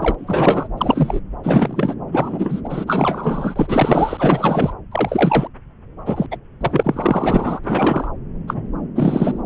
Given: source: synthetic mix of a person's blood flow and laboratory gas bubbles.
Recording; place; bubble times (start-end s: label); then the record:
Doppler ultrasound of blood flow; subclavian vein
0.00-0.15 s: bubbles
0.18-0.68 s: bubbles
0.77-1.21 s: bubbles
1.44-1.96 s: bubbles
2.11-2.60 s: bubbles
2.64-4.73 s: bubbles
4.91-5.48 s: bubbles
6.05-6.26 s: bubbles
6.31-6.37 s: bubbles
6.60-7.60 s: bubbles
7.64-8.08 s: bubbles
8.48-8.67 s: bubbles
8.95-9.42 s: bubbles
From the record:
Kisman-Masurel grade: 343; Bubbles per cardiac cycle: rolling drumbeat, 9 or more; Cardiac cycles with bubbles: 100%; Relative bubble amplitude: loud (0.450 to 0.775); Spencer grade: 3 (all of the cardiac periods contain showers or single bubble signals, but not dominating or overriding the cardiac motion signals); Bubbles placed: anywhere in the cardiac cycle